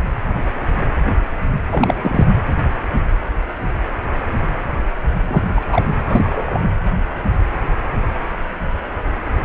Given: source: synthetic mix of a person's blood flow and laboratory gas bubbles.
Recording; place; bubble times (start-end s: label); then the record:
Doppler ultrasound of blood flow; precordium
1.71-2.29 s: bubbles
5.27-5.48 s: bubbles
5.55-5.83 s: bubbles
6.07-6.61 s: bubbles
From the record:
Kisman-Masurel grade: 223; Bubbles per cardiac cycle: several, 3 to 8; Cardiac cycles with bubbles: 10 to 50%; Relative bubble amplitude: loud (0.450 to 0.775); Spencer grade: 2 (many but less than half of the cardiac periods contain bubble signals, singularly or in groups); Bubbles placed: anywhere in the cardiac cycle